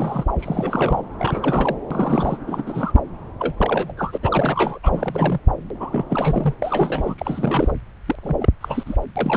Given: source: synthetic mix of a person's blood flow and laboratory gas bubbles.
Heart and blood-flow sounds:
Doppler ultrasound of blood flow; subclavian vein
0.00-0.26 s: bubbles
0.39-1.02 s: bubbles
1.18-1.76 s: bubbles
1.91-2.37 s: bubbles
2.46-2.64 s: bubbles
2.66-3.01 s: bubbles
3.39-3.54 s: bubbles
3.57-3.92 s: bubbles
3.96-4.17 s: bubbles
4.21-4.79 s: bubbles
4.83-5.40 s: bubbles
5.79-6.06 s: bubbles
6.09-6.54 s: bubbles
6.62-7.15 s: bubbles
7.18-7.74 s: bubbles
8.06-8.15 s: bubbles
8.22-8.36 s: bubbles
8.40-8.49 s: bubbles
8.60-8.96 s: bubbles
9.15-9.37 s: bubbles
From the record:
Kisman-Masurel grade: 343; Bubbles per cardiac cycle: rolling drumbeat, 9 or more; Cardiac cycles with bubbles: 100%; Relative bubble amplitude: loud (0.450 to 0.775); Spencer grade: 3 (all of the cardiac periods contain showers or single bubble signals, but not dominating or overriding the cardiac motion signals); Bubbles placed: anywhere in the cardiac cycle

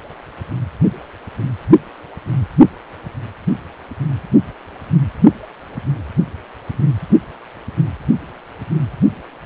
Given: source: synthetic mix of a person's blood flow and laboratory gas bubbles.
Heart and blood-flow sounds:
Doppler ultrasound of blood flow; precordium
no bubbles
From the record:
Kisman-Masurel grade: 000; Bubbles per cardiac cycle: 0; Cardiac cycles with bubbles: 0%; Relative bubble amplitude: no bubbles discernible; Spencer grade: 0 (complete lack of bubble signals)

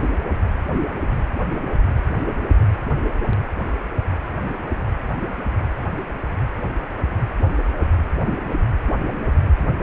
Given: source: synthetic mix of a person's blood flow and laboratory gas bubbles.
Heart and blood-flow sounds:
Doppler ultrasound of blood flow; precordium
0.00-0.07 s: bubbles
From the record:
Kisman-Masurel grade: 112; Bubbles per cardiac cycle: 1 to 2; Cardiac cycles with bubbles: 1 to 10%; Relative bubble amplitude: moderate (0.250 to 0.450); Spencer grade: 1 (occasional bubble signal discernible with the cardiac motion signal, with majority of cardiac periods free of bubbles); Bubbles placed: anywhere in the cardiac cycle

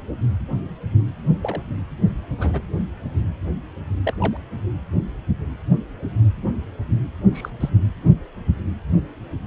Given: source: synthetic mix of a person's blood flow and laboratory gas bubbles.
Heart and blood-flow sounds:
Doppler ultrasound of blood flow; precordium
1.43-1.61 s: bubbles
2.38-2.62 s: bubbles
4.04-4.13 s: bubbles
4.20-4.37 s: bubbles
7.32-7.50 s: bubbles
7.60-7.70 s: bubbles
From the record:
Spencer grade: 2 (many but less than half of the cardiac periods contain bubble signals, singularly or in groups); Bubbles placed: anywhere in the cardiac cycle

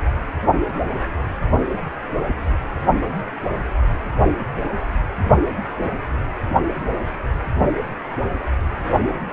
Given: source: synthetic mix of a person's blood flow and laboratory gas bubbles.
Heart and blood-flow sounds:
Doppler ultrasound of blood flow; precordium
no bubbles
From the record:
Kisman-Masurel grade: 000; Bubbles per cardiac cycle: 0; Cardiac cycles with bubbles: 0%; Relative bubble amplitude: no bubbles discernible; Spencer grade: 0 (complete lack of bubble signals)

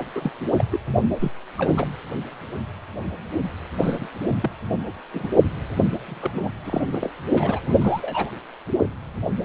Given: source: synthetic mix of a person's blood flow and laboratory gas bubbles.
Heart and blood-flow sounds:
Doppler ultrasound of blood flow; precordium
0.00-0.04 s: bubbles
0.15-0.32 s: bubbles
0.57-0.64 s: bubbles
0.71-0.79 s: bubbles
0.96-1.04 s: bubbles
1.20-1.31 s: bubbles
1.57-1.88 s: bubbles
3.82-4.07 s: bubbles
4.31-4.51 s: bubbles
5.13-5.28 s: bubbles
5.79-5.85 s: bubbles
6.06-6.52 s: bubbles
6.64-6.84 s: bubbles
6.92-7.10 s: bubbles
7.34-7.60 s: bubbles
7.62-7.75 s: bubbles
7.81-8.31 s: bubbles
From the record:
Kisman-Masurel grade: 232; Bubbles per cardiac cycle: several, 3 to 8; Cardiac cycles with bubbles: 50 to 99%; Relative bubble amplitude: moderate (0.250 to 0.450); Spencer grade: 3 (all of the cardiac periods contain showers or single bubble signals, but not dominating or overriding the cardiac motion signals); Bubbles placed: anywhere in the cardiac cycle

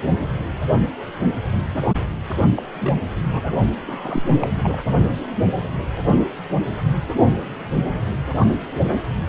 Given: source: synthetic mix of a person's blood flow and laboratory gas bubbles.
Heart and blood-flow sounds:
Doppler ultrasound of blood flow; precordium
2.57-2.63 s: bubbles
2.80-2.93 s: bubbles
3.30-3.54 s: bubbles
3.87-4.22 s: bubbles
4.31-4.36 s: bubbles
4.42-4.48 s: bubbles
4.62-4.79 s: bubbles
From the record:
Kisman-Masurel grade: 221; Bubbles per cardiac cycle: several, 3 to 8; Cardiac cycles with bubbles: 10 to 50%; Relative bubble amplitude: barely perceptible (0.100 to 0.250); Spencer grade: 2 (many but less than half of the cardiac periods contain bubble signals, singularly or in groups); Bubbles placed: only in the low amplitude regions of the cardiac cycle

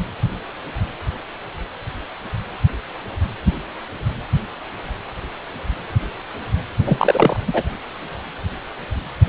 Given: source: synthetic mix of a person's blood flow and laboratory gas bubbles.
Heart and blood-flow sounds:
Doppler ultrasound of blood flow; precordium
6.86-7.40 s: bubbles
7.47-7.63 s: bubbles
From the record:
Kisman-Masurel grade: 213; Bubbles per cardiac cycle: several, 3 to 8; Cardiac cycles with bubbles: 1 to 10%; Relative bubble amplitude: loud (0.450 to 0.775); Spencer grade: 1 (occasional bubble signal discernible with the cardiac motion signal, with majority of cardiac periods free of bubbles); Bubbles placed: anywhere in the cardiac cycle

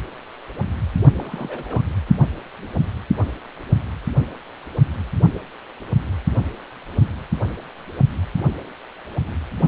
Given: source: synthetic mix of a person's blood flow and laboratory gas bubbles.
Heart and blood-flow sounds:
Doppler ultrasound of blood flow; precordium
1.18-1.83 s: bubbles
2.07-2.15 s: bubbles
From the record:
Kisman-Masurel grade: 211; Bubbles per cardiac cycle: several, 3 to 8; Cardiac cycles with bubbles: 1 to 10%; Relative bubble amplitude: barely perceptible (0.100 to 0.250); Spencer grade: 1 (occasional bubble signal discernible with the cardiac motion signal, with majority of cardiac periods free of bubbles); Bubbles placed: only in the low amplitude regions of the cardiac cycle

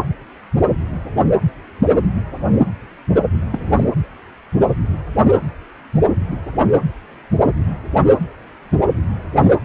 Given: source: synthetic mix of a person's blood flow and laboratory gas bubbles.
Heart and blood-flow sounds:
Doppler ultrasound of blood flow; precordium
3.52-3.84 s: bubbles
From the record:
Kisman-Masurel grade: 212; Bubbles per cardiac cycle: several, 3 to 8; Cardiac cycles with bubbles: 1 to 10%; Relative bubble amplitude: moderate (0.250 to 0.450); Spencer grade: 1 (occasional bubble signal discernible with the cardiac motion signal, with majority of cardiac periods free of bubbles); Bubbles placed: anywhere in the cardiac cycle

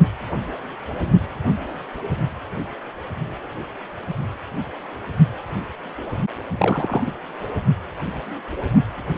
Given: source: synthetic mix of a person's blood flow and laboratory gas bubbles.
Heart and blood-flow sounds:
Doppler ultrasound of blood flow; precordium
6.58-7.04 s: bubbles
7.06-7.12 s: bubbles
From the record:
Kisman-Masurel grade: 212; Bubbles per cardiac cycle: several, 3 to 8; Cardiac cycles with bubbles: 1 to 10%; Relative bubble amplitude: moderate (0.250 to 0.450); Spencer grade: 1 (occasional bubble signal discernible with the cardiac motion signal, with majority of cardiac periods free of bubbles); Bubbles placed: only in the low amplitude regions of the cardiac cycle

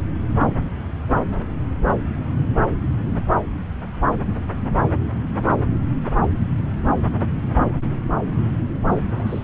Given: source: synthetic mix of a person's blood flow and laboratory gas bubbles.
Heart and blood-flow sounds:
Doppler ultrasound of blood flow; subclavian vein
8.88-8.93 s: bubbles
8.96-9.02 s: bubbles
9.10-9.44 s: bubbles
From the record:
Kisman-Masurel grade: 211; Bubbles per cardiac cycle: several, 3 to 8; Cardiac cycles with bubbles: 1 to 10%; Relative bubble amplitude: barely perceptible (0.100 to 0.250); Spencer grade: 1 (occasional bubble signal discernible with the cardiac motion signal, with majority of cardiac periods free of bubbles); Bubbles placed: anywhere in the cardiac cycle

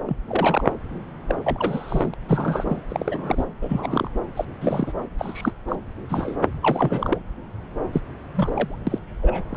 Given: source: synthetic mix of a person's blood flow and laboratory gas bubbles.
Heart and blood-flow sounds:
Doppler ultrasound of blood flow; subclavian vein
0.07-0.16 s: bubbles
0.28-0.70 s: bubbles
1.28-1.35 s: bubbles
1.43-2.14 s: bubbles
2.26-2.82 s: bubbles
2.88-3.47 s: bubbles
3.61-4.09 s: bubbles
4.35-4.45 s: bubbles
4.60-4.93 s: bubbles
5.18-5.52 s: bubbles
5.68-5.76 s: bubbles
6.08-6.36 s: bubbles
6.62-7.18 s: bubbles
7.92-8.02 s: bubbles
8.35-8.79 s: bubbles
8.87-8.99 s: bubbles
9.21-9.45 s: bubbles
9.51-9.57 s: bubbles
From the record:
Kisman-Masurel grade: 242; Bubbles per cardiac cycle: several, 3 to 8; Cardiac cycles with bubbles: 100%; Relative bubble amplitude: moderate (0.250 to 0.450); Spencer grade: 3 (all of the cardiac periods contain showers or single bubble signals, but not dominating or overriding the cardiac motion signals); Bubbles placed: anywhere in the cardiac cycle

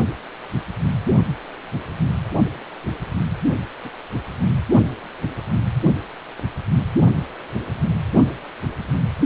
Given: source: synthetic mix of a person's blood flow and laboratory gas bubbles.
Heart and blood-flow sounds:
Doppler ultrasound of blood flow; precordium
3.83-3.89 s: bubbles
From the record:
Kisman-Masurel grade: 122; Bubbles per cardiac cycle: 1 to 2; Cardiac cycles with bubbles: 10 to 50%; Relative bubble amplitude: moderate (0.250 to 0.450); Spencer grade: 2 (many but less than half of the cardiac periods contain bubble signals, singularly or in groups); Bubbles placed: only in the low amplitude regions of the cardiac cycle

